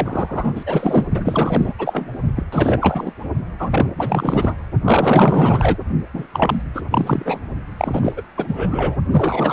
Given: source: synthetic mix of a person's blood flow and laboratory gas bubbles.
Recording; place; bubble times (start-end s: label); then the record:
Doppler ultrasound of blood flow; precordium
0.00-1.06 s: bubbles
1.14-1.74 s: bubbles
1.78-2.08 s: bubbles
2.36-2.43 s: bubbles
2.52-3.12 s: bubbles
3.59-3.86 s: bubbles
3.96-4.56 s: bubbles
4.84-5.76 s: bubbles
6.13-6.26 s: bubbles
6.33-6.62 s: bubbles
6.74-6.82 s: bubbles
6.90-7.39 s: bubbles
7.77-8.23 s: bubbles
8.37-8.97 s: bubbles
9.11-9.53 s: bubbles
From the record:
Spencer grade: 4 (maximum detectable bubble signal sounding continuously throughout systole and diastole of every cardiac period, and overriding the amplitude of the normal cardiac signals); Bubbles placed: only in the low amplitude regions of the cardiac cycle